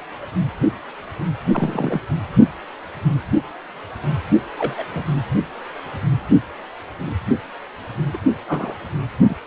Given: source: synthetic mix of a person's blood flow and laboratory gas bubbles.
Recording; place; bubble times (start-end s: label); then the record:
Doppler ultrasound of blood flow; precordium
1.52-2.00 s: bubbles
4.57-4.83 s: bubbles
4.93-5.04 s: bubbles
8.13-8.18 s: bubbles
8.47-8.74 s: bubbles
9.29-9.36 s: bubbles
From the record:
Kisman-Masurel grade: 122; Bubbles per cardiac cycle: 1 to 2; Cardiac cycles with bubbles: 10 to 50%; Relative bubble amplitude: moderate (0.250 to 0.450); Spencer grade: 2 (many but less than half of the cardiac periods contain bubble signals, singularly or in groups); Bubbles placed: only in the low amplitude regions of the cardiac cycle